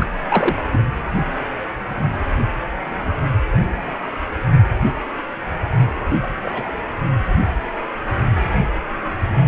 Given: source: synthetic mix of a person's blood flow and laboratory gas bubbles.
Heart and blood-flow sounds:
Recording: Doppler ultrasound of blood flow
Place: precordium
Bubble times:
0.00-0.10 s: bubbles
0.28-0.56 s: bubbles
0.72-0.82 s: bubbles
6.23-6.28 s: bubbles
6.43-6.68 s: bubbles
From the record:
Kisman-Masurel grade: 222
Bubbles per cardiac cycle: several, 3 to 8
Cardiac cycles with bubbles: 10 to 50%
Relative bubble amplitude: moderate (0.250 to 0.450)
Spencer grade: 2 (many but less than half of the cardiac periods contain bubble signals, singularly or in groups)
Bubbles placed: anywhere in the cardiac cycle

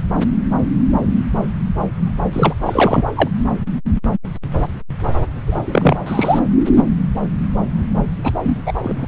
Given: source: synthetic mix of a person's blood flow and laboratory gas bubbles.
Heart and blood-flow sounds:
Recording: Doppler ultrasound of blood flow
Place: subclavian vein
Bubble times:
2.32-2.53 s: bubbles
2.61-3.03 s: bubbles
3.16-3.29 s: bubbles
5.47-5.97 s: bubbles
6.06-6.39 s: bubbles
8.23-8.33 s: bubbles
8.42-8.58 s: bubbles
8.66-8.73 s: bubbles
8.83-9.06 s: bubbles
From the record:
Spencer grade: 2 (many but less than half of the cardiac periods contain bubble signals, singularly or in groups)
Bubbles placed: anywhere in the cardiac cycle

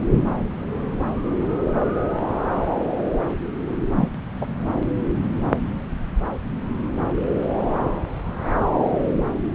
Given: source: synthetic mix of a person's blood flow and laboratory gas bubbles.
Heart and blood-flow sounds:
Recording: Doppler ultrasound of blood flow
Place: subclavian vein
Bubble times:
3.95-4.08 s: bubbles
4.41-4.46 s: bubbles
From the record:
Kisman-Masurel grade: 112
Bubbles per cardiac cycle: 1 to 2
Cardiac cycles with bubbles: 1 to 10%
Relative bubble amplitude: moderate (0.250 to 0.450)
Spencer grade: 1 (occasional bubble signal discernible with the cardiac motion signal, with majority of cardiac periods free of bubbles)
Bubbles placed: anywhere in the cardiac cycle

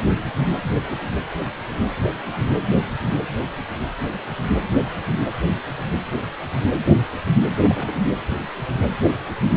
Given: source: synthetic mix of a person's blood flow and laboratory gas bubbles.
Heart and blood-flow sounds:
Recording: Doppler ultrasound of blood flow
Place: precordium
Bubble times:
7.54-8.05 s: bubbles
From the record:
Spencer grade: 1 (occasional bubble signal discernible with the cardiac motion signal, with majority of cardiac periods free of bubbles)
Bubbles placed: anywhere in the cardiac cycle

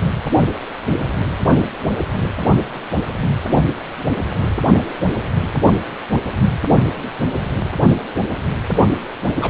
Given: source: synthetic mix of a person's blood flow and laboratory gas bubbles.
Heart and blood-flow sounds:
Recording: Doppler ultrasound of blood flow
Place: precordium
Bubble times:
0.41-0.47 s: bubbles
9.39-9.50 s: bubbles
From the record:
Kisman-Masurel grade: 122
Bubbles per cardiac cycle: 1 to 2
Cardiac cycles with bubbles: 10 to 50%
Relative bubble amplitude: moderate (0.250 to 0.450)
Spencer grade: 2 (many but less than half of the cardiac periods contain bubble signals, singularly or in groups)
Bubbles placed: anywhere in the cardiac cycle

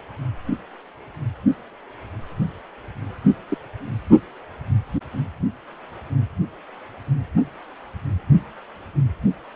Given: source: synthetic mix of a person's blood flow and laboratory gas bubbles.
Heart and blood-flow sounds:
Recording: Doppler ultrasound of blood flow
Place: precordium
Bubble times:
3.49-3.58 s: bubbles
From the record:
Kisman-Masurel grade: 112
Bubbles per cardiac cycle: 1 to 2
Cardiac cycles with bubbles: 1 to 10%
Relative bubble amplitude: moderate (0.250 to 0.450)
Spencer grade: 1 (occasional bubble signal discernible with the cardiac motion signal, with majority of cardiac periods free of bubbles)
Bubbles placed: only in the low amplitude regions of the cardiac cycle

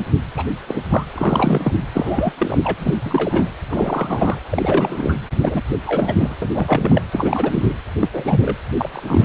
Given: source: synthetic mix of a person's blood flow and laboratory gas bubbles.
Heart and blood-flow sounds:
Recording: Doppler ultrasound of blood flow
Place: precordium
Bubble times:
0.36-0.46 s: bubbles
0.68-0.80 s: bubbles
0.90-1.04 s: bubbles
1.14-1.76 s: bubbles
1.93-2.33 s: bubbles
2.38-2.58 s: bubbles
2.64-2.75 s: bubbles
2.79-2.95 s: bubbles
3.04-3.50 s: bubbles
3.69-4.40 s: bubbles
4.47-5.17 s: bubbles
5.41-5.62 s: bubbles
5.85-6.36 s: bubbles
6.42-6.49 s: bubbles
6.52-7.02 s: bubbles
7.12-7.73 s: bubbles
7.96-8.09 s: bubbles
8.12-8.56 s: bubbles
8.78-9.25 s: bubbles
From the record:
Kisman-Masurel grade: 242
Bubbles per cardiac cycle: several, 3 to 8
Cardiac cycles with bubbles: 100%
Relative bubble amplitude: moderate (0.250 to 0.450)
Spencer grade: 3 (all of the cardiac periods contain showers or single bubble signals, but not dominating or overriding the cardiac motion signals)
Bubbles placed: anywhere in the cardiac cycle

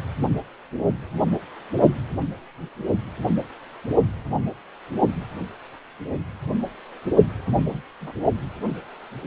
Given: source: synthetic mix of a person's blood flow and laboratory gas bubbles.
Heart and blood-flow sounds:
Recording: Doppler ultrasound of blood flow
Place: precordium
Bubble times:
7.45-7.83 s: bubbles
8.00-8.12 s: bubbles
From the record:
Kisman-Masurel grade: 111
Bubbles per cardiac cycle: 1 to 2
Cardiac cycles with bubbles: 1 to 10%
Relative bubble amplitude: barely perceptible (0.100 to 0.250)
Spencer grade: 1 (occasional bubble signal discernible with the cardiac motion signal, with majority of cardiac periods free of bubbles)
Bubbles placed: only in the low amplitude regions of the cardiac cycle

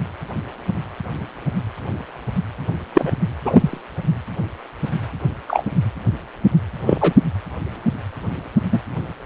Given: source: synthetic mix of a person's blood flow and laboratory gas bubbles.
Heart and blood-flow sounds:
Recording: Doppler ultrasound of blood flow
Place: precordium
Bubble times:
2.94-3.12 s: bubbles
3.44-3.80 s: bubbles
5.47-5.63 s: bubbles
6.86-7.13 s: bubbles
8.71-8.79 s: bubbles
From the record:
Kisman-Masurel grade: 123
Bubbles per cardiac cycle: 1 to 2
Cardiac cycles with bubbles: 10 to 50%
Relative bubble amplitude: loud (0.450 to 0.775)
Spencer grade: 2 (many but less than half of the cardiac periods contain bubble signals, singularly or in groups)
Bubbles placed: anywhere in the cardiac cycle

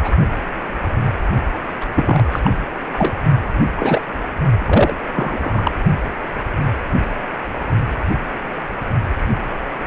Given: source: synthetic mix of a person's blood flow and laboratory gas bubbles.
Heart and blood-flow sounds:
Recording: Doppler ultrasound of blood flow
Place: precordium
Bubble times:
0.00-0.11 s: bubbles
1.80-1.84 s: bubbles
1.96-2.23 s: bubbles
2.31-2.40 s: bubbles
2.43-2.51 s: bubbles
2.93-3.14 s: bubbles
3.76-4.01 s: bubbles
4.60-4.96 s: bubbles
5.14-5.71 s: bubbles
From the record:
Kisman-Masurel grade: 233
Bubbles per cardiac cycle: several, 3 to 8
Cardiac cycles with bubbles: 50 to 99%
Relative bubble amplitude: loud (0.450 to 0.775)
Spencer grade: 3 (all of the cardiac periods contain showers or single bubble signals, but not dominating or overriding the cardiac motion signals)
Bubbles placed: only in the low amplitude regions of the cardiac cycle

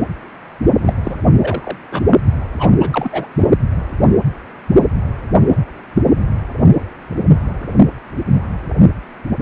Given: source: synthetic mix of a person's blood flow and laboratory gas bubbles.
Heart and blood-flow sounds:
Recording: Doppler ultrasound of blood flow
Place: precordium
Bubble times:
0.77-0.93 s: bubbles
1.04-1.15 s: bubbles
1.40-1.77 s: bubbles
1.90-2.23 s: bubbles
2.59-2.70 s: bubbles
2.80-3.27 s: bubbles
3.38-3.48 s: bubbles
From the record:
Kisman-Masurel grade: 222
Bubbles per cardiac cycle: several, 3 to 8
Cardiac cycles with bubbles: 10 to 50%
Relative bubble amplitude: moderate (0.250 to 0.450)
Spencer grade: 2 (many but less than half of the cardiac periods contain bubble signals, singularly or in groups)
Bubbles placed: anywhere in the cardiac cycle

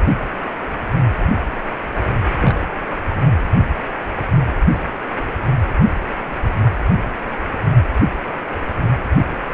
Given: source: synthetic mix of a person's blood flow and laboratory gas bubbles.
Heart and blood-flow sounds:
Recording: Doppler ultrasound of blood flow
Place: precordium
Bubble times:
2.40-2.73 s: bubbles
3.09-3.15 s: bubbles
From the record:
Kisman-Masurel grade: 112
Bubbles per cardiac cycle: 1 to 2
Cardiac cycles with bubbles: 1 to 10%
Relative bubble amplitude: moderate (0.250 to 0.450)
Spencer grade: 1 (occasional bubble signal discernible with the cardiac motion signal, with majority of cardiac periods free of bubbles)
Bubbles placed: anywhere in the cardiac cycle

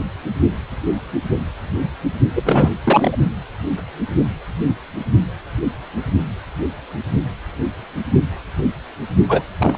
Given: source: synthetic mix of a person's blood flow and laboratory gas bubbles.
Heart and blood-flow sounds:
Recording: Doppler ultrasound of blood flow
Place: precordium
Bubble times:
2.35-2.42 s: bubbles
2.44-2.71 s: bubbles
2.84-3.16 s: bubbles
9.28-9.42 s: bubbles
9.59-9.78 s: bubbles
From the record:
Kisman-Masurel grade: 223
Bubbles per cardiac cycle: several, 3 to 8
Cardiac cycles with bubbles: 10 to 50%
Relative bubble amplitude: loud (0.450 to 0.775)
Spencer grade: 2 (many but less than half of the cardiac periods contain bubble signals, singularly or in groups)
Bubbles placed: only in the low amplitude regions of the cardiac cycle

